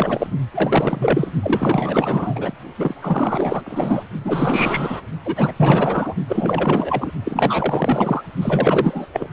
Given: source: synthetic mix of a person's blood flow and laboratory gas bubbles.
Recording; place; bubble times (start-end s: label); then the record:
Doppler ultrasound of blood flow; precordium
0.00-0.27 s: bubbles
0.54-1.31 s: bubbles
1.42-2.54 s: bubbles
2.77-2.94 s: bubbles
3.02-3.62 s: bubbles
3.64-4.03 s: bubbles
4.24-5.01 s: bubbles
5.25-5.52 s: bubbles
5.56-6.14 s: bubbles
6.29-7.12 s: bubbles
7.25-8.23 s: bubbles
8.41-9.06 s: bubbles
9.12-9.28 s: bubbles
From the record:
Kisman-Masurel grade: 444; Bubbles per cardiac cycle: continuous sound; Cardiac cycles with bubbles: 100%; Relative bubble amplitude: maximal (0.775 to 0.999); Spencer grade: 4 (maximum detectable bubble signal sounding continuously throughout systole and diastole of every cardiac period, and overriding the amplitude of the normal cardiac signals); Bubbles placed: only in the low amplitude regions of the cardiac cycle